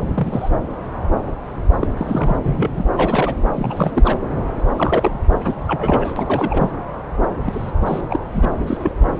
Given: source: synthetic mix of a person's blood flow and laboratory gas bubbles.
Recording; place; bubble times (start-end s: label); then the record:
Doppler ultrasound of blood flow; subclavian vein
0.14-0.49 s: bubbles
1.79-1.89 s: bubbles
1.97-2.37 s: bubbles
2.42-2.85 s: bubbles
2.94-3.35 s: bubbles
3.54-3.92 s: bubbles
3.95-4.18 s: bubbles
4.76-5.18 s: bubbles
5.44-5.54 s: bubbles
5.67-6.12 s: bubbles
6.16-6.71 s: bubbles
7.46-7.71 s: bubbles
7.81-8.01 s: bubbles
8.10-8.19 s: bubbles
8.34-8.48 s: bubbles
8.66-8.93 s: bubbles
From the record:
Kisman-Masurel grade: 232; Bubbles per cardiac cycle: several, 3 to 8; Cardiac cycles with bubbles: 50 to 99%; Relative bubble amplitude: moderate (0.250 to 0.450); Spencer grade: 3 (all of the cardiac periods contain showers or single bubble signals, but not dominating or overriding the cardiac motion signals); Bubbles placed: anywhere in the cardiac cycle